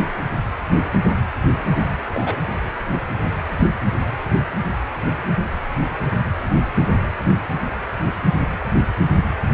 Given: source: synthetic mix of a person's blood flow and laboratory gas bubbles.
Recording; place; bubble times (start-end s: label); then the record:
Doppler ultrasound of blood flow; precordium
2.15-2.37 s: bubbles
From the record:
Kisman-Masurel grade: 113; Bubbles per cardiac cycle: 1 to 2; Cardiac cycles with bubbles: 1 to 10%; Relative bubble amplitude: loud (0.450 to 0.775); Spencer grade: 1 (occasional bubble signal discernible with the cardiac motion signal, with majority of cardiac periods free of bubbles); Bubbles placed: anywhere in the cardiac cycle